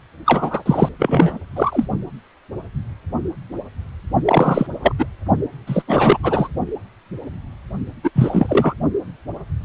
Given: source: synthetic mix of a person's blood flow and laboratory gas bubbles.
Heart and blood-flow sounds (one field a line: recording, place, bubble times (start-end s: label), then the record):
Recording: Doppler ultrasound of blood flow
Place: precordium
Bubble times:
0.26-0.62 s: bubbles
0.66-0.89 s: bubbles
0.98-1.38 s: bubbles
1.55-1.85 s: bubbles
4.25-4.67 s: bubbles
4.82-4.93 s: bubbles
4.98-5.05 s: bubbles
5.67-5.83 s: bubbles
5.88-6.18 s: bubbles
6.22-6.48 s: bubbles
8.03-8.11 s: bubbles
8.15-8.74 s: bubbles
From the record:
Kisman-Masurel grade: 333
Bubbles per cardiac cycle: rolling drumbeat, 9 or more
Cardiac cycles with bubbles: 50 to 99%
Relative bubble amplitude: loud (0.450 to 0.775)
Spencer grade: 3 (all of the cardiac periods contain showers or single bubble signals, but not dominating or overriding the cardiac motion signals)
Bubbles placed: only in the low amplitude regions of the cardiac cycle